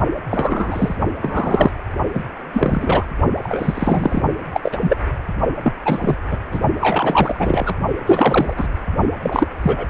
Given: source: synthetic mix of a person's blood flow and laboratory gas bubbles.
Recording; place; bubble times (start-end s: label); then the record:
Doppler ultrasound of blood flow; precordium
0.30-0.97 s: bubbles
1.21-1.71 s: bubbles
2.14-2.23 s: bubbles
2.53-3.05 s: bubbles
3.38-4.23 s: bubbles
4.53-4.78 s: bubbles
4.81-4.96 s: bubbles
5.62-5.73 s: bubbles
5.85-6.18 s: bubbles
6.31-6.38 s: bubbles
6.52-6.60 s: bubbles
6.79-7.75 s: bubbles
8.06-8.54 s: bubbles
8.56-8.68 s: bubbles
9.22-9.48 s: bubbles
9.62-9.86 s: bubbles
From the record:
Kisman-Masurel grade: 243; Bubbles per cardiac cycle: several, 3 to 8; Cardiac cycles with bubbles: 100%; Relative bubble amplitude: loud (0.450 to 0.775); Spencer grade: 3 (all of the cardiac periods contain showers or single bubble signals, but not dominating or overriding the cardiac motion signals); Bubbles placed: only in the low amplitude regions of the cardiac cycle